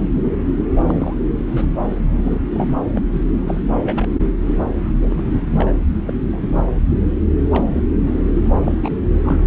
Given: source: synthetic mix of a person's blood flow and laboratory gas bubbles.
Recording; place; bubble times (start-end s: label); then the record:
Doppler ultrasound of blood flow; subclavian vein
0.14-0.36 s: bubbles
0.73-1.15 s: bubbles
1.51-1.71 s: bubbles
1.90-1.97 s: bubbles
2.25-2.41 s: bubbles
2.54-2.79 s: bubbles
2.96-3.02 s: bubbles
3.12-3.24 s: bubbles
3.47-3.62 s: bubbles
3.85-4.09 s: bubbles
5.01-5.32 s: bubbles
5.45-5.73 s: bubbles
6.05-6.13 s: bubbles
6.23-6.73 s: bubbles
7.51-7.86 s: bubbles
8.05-8.11 s: bubbles
8.53-8.72 s: bubbles
8.82-8.89 s: bubbles
9.24-9.39 s: bubbles
From the record:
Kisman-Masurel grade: 242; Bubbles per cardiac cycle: several, 3 to 8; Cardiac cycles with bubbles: 100%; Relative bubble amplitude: moderate (0.250 to 0.450); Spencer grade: 3 (all of the cardiac periods contain showers or single bubble signals, but not dominating or overriding the cardiac motion signals); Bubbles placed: anywhere in the cardiac cycle